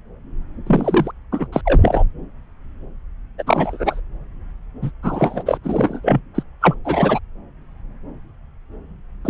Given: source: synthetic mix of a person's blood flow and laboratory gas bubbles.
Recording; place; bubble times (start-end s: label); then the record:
Doppler ultrasound of blood flow; subclavian vein
0.66-1.11 s: bubbles
1.31-1.48 s: bubbles
1.52-1.61 s: bubbles
1.65-2.03 s: bubbles
3.38-3.43 s: bubbles
3.46-4.00 s: bubbles
4.82-4.91 s: bubbles
5.03-5.43 s: bubbles
5.46-5.58 s: bubbles
5.63-6.00 s: bubbles
6.04-6.20 s: bubbles
6.35-6.43 s: bubbles
6.61-6.75 s: bubbles
6.84-7.19 s: bubbles
9.24-9.30 s: bubbles
From the record:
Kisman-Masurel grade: 233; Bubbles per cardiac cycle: several, 3 to 8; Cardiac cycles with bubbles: 50 to 99%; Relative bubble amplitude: loud (0.450 to 0.775); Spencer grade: 3 (all of the cardiac periods contain showers or single bubble signals, but not dominating or overriding the cardiac motion signals); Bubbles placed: anywhere in the cardiac cycle